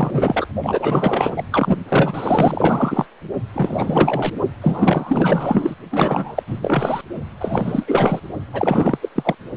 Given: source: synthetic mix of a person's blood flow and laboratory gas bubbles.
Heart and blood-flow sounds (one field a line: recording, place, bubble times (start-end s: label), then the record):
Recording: Doppler ultrasound of blood flow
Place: precordium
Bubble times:
0.00-0.47 s: bubbles
0.63-1.48 s: bubbles
1.52-1.77 s: bubbles
1.88-3.06 s: bubbles
3.53-4.33 s: bubbles
4.62-5.75 s: bubbles
5.91-6.43 s: bubbles
6.47-6.59 s: bubbles
6.62-7.01 s: bubbles
7.41-7.84 s: bubbles
7.87-8.20 s: bubbles
8.53-8.98 s: bubbles
9.01-9.09 s: bubbles
9.15-9.35 s: bubbles
From the record:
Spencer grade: 4 (maximum detectable bubble signal sounding continuously throughout systole and diastole of every cardiac period, and overriding the amplitude of the normal cardiac signals)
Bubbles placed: only in the low amplitude regions of the cardiac cycle